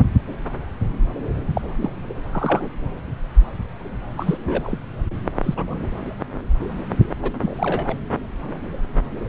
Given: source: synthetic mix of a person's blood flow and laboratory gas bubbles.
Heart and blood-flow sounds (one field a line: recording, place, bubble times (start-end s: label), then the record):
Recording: Doppler ultrasound of blood flow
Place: subclavian vein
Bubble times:
1.54-1.61 s: bubbles
1.81-1.90 s: bubbles
2.09-2.14 s: bubbles
2.33-2.69 s: bubbles
4.17-4.78 s: bubbles
5.43-5.75 s: bubbles
7.22-7.32 s: bubbles
7.40-7.96 s: bubbles
From the record:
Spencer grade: 3 (all of the cardiac periods contain showers or single bubble signals, but not dominating or overriding the cardiac motion signals)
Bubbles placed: anywhere in the cardiac cycle